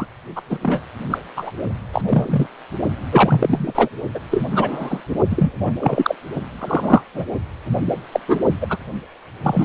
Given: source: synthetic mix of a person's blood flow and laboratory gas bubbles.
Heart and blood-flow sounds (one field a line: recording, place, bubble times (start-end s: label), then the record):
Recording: Doppler ultrasound of blood flow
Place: precordium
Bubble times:
0.00-0.06 s: bubbles
0.36-0.41 s: bubbles
0.49-0.58 s: bubbles
0.62-0.80 s: bubbles
1.10-1.18 s: bubbles
1.36-1.51 s: bubbles
1.93-2.02 s: bubbles
2.07-2.47 s: bubbles
3.11-3.89 s: bubbles
4.15-4.19 s: bubbles
4.31-4.45 s: bubbles
4.50-5.01 s: bubbles
5.30-5.52 s: bubbles
5.62-5.74 s: bubbles
5.79-6.15 s: bubbles
6.60-7.02 s: bubbles
7.14-7.25 s: bubbles
8.12-8.20 s: bubbles
8.28-8.38 s: bubbles
8.61-8.67 s: bubbles
8.70-8.78 s: bubbles
9.43-9.65 s: bubbles
From the record:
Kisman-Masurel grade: 243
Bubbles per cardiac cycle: several, 3 to 8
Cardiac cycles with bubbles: 100%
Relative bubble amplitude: loud (0.450 to 0.775)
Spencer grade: 3 (all of the cardiac periods contain showers or single bubble signals, but not dominating or overriding the cardiac motion signals)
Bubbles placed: only in the low amplitude regions of the cardiac cycle